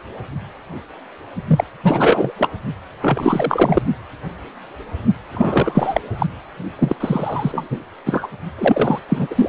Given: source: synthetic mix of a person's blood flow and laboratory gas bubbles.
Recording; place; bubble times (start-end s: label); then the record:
Doppler ultrasound of blood flow; precordium
1.48-1.64 s: bubbles
1.83-2.32 s: bubbles
2.38-2.48 s: bubbles
3.01-3.82 s: bubbles
5.32-6.01 s: bubbles
6.19-6.26 s: bubbles
6.79-6.96 s: bubbles
7.00-7.78 s: bubbles
8.05-8.28 s: bubbles
8.58-9.00 s: bubbles
9.09-9.49 s: bubbles
From the record:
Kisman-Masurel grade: 333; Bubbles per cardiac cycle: rolling drumbeat, 9 or more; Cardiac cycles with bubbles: 50 to 99%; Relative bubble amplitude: loud (0.450 to 0.775); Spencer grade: 3 (all of the cardiac periods contain showers or single bubble signals, but not dominating or overriding the cardiac motion signals); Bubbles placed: only in the low amplitude regions of the cardiac cycle